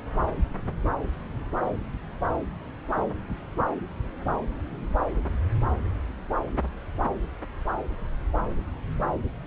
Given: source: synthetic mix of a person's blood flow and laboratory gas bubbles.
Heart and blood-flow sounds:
Doppler ultrasound of blood flow; subclavian vein
2.96-3.02 s: bubbles
From the record:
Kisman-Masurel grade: 121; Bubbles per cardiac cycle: 1 to 2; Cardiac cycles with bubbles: 10 to 50%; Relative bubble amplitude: barely perceptible (0.100 to 0.250); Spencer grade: 2 (many but less than half of the cardiac periods contain bubble signals, singularly or in groups); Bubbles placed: anywhere in the cardiac cycle

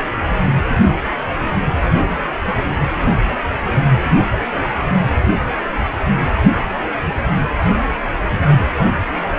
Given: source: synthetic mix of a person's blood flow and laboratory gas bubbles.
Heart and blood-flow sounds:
Doppler ultrasound of blood flow; precordium
no bubbles
From the record:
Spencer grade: 0 (complete lack of bubble signals)

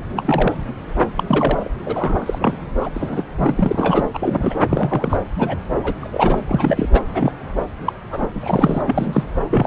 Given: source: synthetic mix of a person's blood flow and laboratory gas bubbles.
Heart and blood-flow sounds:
Doppler ultrasound of blood flow; subclavian vein
0.00-0.05 s: bubbles
0.16-0.57 s: bubbles
1.17-1.23 s: bubbles
1.27-1.71 s: bubbles
1.85-2.56 s: bubbles
2.79-2.90 s: bubbles
2.94-3.23 s: bubbles
3.37-4.10 s: bubbles
4.14-4.54 s: bubbles
4.69-5.17 s: bubbles
5.36-5.57 s: bubbles
5.83-5.93 s: bubbles
6.00-6.43 s: bubbles
6.48-6.89 s: bubbles
6.93-7.01 s: bubbles
7.14-7.32 s: bubbles
7.85-7.92 s: bubbles
8.10-8.27 s: bubbles
8.34-8.82 s: bubbles
8.86-9.23 s: bubbles
9.50-9.67 s: bubbles
From the record:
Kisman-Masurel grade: 242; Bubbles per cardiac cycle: several, 3 to 8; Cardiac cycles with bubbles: 100%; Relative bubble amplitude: moderate (0.250 to 0.450); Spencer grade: 3 (all of the cardiac periods contain showers or single bubble signals, but not dominating or overriding the cardiac motion signals); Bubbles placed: anywhere in the cardiac cycle

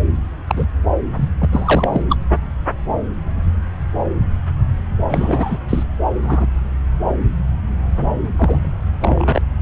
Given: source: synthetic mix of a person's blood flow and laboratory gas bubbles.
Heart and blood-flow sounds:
Doppler ultrasound of blood flow; subclavian vein
0.47-0.66 s: bubbles
1.17-1.29 s: bubbles
1.39-1.49 s: bubbles
1.52-2.02 s: bubbles
2.09-2.17 s: bubbles
5.09-5.58 s: bubbles
5.68-5.83 s: bubbles
6.21-6.46 s: bubbles
8.36-8.73 s: bubbles
9.01-9.42 s: bubbles
From the record:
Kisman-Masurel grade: 233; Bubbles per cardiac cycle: several, 3 to 8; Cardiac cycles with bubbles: 50 to 99%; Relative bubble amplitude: loud (0.450 to 0.775); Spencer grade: 3 (all of the cardiac periods contain showers or single bubble signals, but not dominating or overriding the cardiac motion signals); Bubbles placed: anywhere in the cardiac cycle

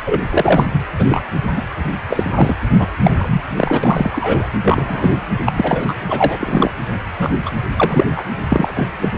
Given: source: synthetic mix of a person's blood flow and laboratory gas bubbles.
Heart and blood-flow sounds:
Doppler ultrasound of blood flow; precordium
0.05-0.20 s: bubbles
0.30-0.66 s: bubbles
0.72-0.84 s: bubbles
0.98-1.05 s: bubbles
1.09-1.24 s: bubbles
1.56-1.61 s: bubbles
2.08-2.54 s: bubbles
2.79-2.87 s: bubbles
3.01-3.42 s: bubbles
3.56-4.10 s: bubbles
4.13-4.47 s: bubbles
4.64-5.18 s: bubbles
5.46-5.52 s: bubbles
5.56-5.94 s: bubbles
6.05-6.71 s: bubbles
7.18-7.31 s: bubbles
7.45-7.51 s: bubbles
7.77-8.06 s: bubbles
8.16-8.26 s: bubbles
8.50-8.87 s: bubbles
9.01-9.10 s: bubbles
From the record:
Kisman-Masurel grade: 243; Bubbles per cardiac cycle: several, 3 to 8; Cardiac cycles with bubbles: 100%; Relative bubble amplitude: loud (0.450 to 0.775); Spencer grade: 3 (all of the cardiac periods contain showers or single bubble signals, but not dominating or overriding the cardiac motion signals); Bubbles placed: anywhere in the cardiac cycle

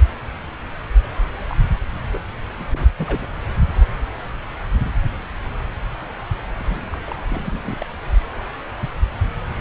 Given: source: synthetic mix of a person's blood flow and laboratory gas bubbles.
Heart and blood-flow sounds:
Doppler ultrasound of blood flow; subclavian vein
1.41-1.57 s: bubbles
2.12-2.21 s: bubbles
2.57-2.67 s: bubbles
2.72-2.89 s: bubbles
2.97-3.29 s: bubbles
6.58-7.25 s: bubbles
7.29-7.76 s: bubbles
7.79-7.86 s: bubbles
From the record:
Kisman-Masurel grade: 221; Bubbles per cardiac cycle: several, 3 to 8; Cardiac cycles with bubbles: 10 to 50%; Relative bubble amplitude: barely perceptible (0.100 to 0.250); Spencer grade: 2 (many but less than half of the cardiac periods contain bubble signals, singularly or in groups); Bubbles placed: anywhere in the cardiac cycle

